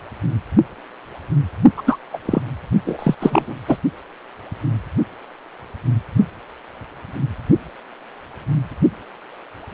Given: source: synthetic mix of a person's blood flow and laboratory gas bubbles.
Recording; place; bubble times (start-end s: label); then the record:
Doppler ultrasound of blood flow; precordium
1.77-1.82 s: bubbles
1.86-1.97 s: bubbles
2.12-2.18 s: bubbles
2.25-2.42 s: bubbles
2.86-3.15 s: bubbles
3.20-3.55 s: bubbles
3.67-3.77 s: bubbles
From the record:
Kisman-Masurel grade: 223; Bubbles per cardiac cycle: several, 3 to 8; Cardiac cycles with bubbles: 10 to 50%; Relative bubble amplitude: loud (0.450 to 0.775); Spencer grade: 2 (many but less than half of the cardiac periods contain bubble signals, singularly or in groups); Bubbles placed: only in the low amplitude regions of the cardiac cycle